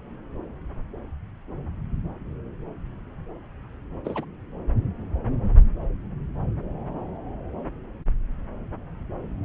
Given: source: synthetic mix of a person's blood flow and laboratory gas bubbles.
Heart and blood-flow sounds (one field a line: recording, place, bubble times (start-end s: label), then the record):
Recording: Doppler ultrasound of blood flow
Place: subclavian vein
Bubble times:
4.04-4.25 s: bubbles
From the record:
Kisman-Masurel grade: 111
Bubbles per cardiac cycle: 1 to 2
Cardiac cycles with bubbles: 1 to 10%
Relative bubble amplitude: barely perceptible (0.100 to 0.250)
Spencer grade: 1 (occasional bubble signal discernible with the cardiac motion signal, with majority of cardiac periods free of bubbles)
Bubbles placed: anywhere in the cardiac cycle